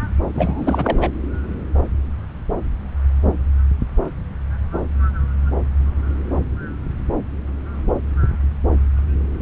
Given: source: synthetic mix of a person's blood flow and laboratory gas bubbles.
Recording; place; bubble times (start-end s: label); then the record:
Doppler ultrasound of blood flow; subclavian vein
0.34-1.08 s: bubbles
From the record:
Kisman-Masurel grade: 212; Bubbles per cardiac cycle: several, 3 to 8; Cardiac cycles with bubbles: 1 to 10%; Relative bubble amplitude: moderate (0.250 to 0.450); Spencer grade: 1 (occasional bubble signal discernible with the cardiac motion signal, with majority of cardiac periods free of bubbles); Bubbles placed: anywhere in the cardiac cycle